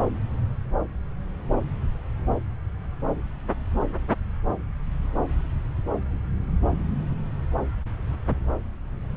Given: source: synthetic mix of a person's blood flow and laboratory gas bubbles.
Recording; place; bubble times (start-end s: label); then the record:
Doppler ultrasound of blood flow; subclavian vein
no bubbles
From the record:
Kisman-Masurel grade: 000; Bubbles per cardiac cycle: 0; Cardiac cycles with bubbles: 0%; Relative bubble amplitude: no bubbles discernible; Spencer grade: 0 (complete lack of bubble signals)